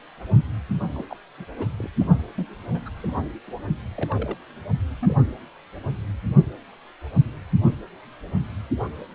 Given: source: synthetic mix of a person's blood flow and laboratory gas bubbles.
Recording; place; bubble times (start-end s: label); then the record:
Doppler ultrasound of blood flow; precordium
0.93-1.04 s: bubbles
1.09-1.16 s: bubbles
1.38-1.44 s: bubbles
1.59-1.66 s: bubbles
1.78-1.89 s: bubbles
2.01-2.04 s: bubbles
2.35-2.47 s: bubbles
2.70-2.80 s: bubbles
2.85-2.89 s: bubbles
2.96-3.27 s: bubbles
3.48-3.51 s: bubbles
3.95-4.37 s: bubbles
5.00-5.13 s: bubbles
From the record:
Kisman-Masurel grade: 221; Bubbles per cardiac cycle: several, 3 to 8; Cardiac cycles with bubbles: 10 to 50%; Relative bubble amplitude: barely perceptible (0.100 to 0.250); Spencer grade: 2 (many but less than half of the cardiac periods contain bubble signals, singularly or in groups); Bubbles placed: only in the low amplitude regions of the cardiac cycle